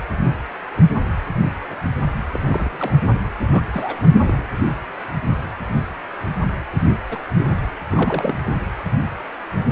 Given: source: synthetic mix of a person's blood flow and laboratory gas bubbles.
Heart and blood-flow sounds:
Doppler ultrasound of blood flow; precordium
2.33-2.40 s: bubbles
2.46-2.96 s: bubbles
3.50-3.63 s: bubbles
3.73-4.47 s: bubbles
7.09-7.18 s: bubbles
7.37-7.59 s: bubbles
7.92-8.53 s: bubbles
From the record:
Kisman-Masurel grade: 221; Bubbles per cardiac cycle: several, 3 to 8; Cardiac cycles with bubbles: 10 to 50%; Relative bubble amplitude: barely perceptible (0.100 to 0.250); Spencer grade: 2 (many but less than half of the cardiac periods contain bubble signals, singularly or in groups); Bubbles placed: anywhere in the cardiac cycle

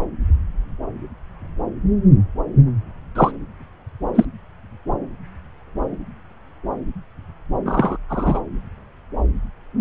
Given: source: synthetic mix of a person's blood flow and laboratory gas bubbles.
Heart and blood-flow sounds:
Doppler ultrasound of blood flow; subclavian vein
3.15-3.32 s: bubbles
4.14-4.25 s: bubbles
7.65-7.97 s: bubbles
8.09-8.41 s: bubbles
From the record:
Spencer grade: 2 (many but less than half of the cardiac periods contain bubble signals, singularly or in groups); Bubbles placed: anywhere in the cardiac cycle

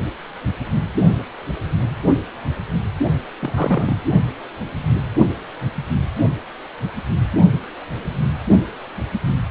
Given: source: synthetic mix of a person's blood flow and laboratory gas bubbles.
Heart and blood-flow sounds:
Doppler ultrasound of blood flow; precordium
3.39-3.98 s: bubbles
From the record:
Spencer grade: 2 (many but less than half of the cardiac periods contain bubble signals, singularly or in groups); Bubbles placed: only in the low amplitude regions of the cardiac cycle

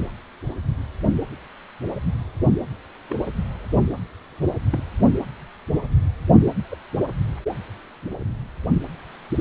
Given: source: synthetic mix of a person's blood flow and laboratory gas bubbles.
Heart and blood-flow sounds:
Doppler ultrasound of blood flow; precordium
3.09-3.16 s: bubbles
4.70-4.83 s: bubbles
6.45-6.52 s: bubbles
6.71-6.76 s: bubbles
From the record:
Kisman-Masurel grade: 121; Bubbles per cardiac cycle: 1 to 2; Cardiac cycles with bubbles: 10 to 50%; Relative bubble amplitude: barely perceptible (0.100 to 0.250); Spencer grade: 2 (many but less than half of the cardiac periods contain bubble signals, singularly or in groups); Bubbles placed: anywhere in the cardiac cycle

